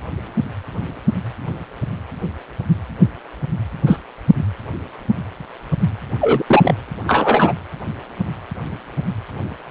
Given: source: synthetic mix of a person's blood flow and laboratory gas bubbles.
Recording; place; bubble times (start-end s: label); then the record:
Doppler ultrasound of blood flow; precordium
3.86-3.99 s: bubbles
6.21-6.43 s: bubbles
6.47-6.75 s: bubbles
7.07-7.53 s: bubbles
From the record:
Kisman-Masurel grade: 123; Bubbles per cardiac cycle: 1 to 2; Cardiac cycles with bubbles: 10 to 50%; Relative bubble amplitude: loud (0.450 to 0.775); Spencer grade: 2 (many but less than half of the cardiac periods contain bubble signals, singularly or in groups); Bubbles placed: anywhere in the cardiac cycle